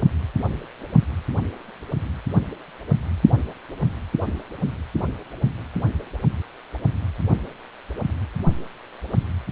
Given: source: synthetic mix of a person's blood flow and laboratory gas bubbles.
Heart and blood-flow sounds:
Doppler ultrasound of blood flow; precordium
no bubbles
From the record:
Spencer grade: 0 (complete lack of bubble signals)

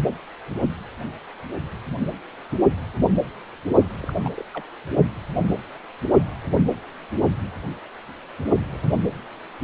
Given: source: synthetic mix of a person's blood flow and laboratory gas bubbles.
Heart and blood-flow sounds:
Doppler ultrasound of blood flow; precordium
4.03-4.13 s: bubbles
4.23-4.42 s: bubbles
4.54-4.64 s: bubbles
From the record:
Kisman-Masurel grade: 211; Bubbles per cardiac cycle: several, 3 to 8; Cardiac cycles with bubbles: 1 to 10%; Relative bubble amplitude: barely perceptible (0.100 to 0.250); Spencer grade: 1 (occasional bubble signal discernible with the cardiac motion signal, with majority of cardiac periods free of bubbles); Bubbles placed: only in the low amplitude regions of the cardiac cycle

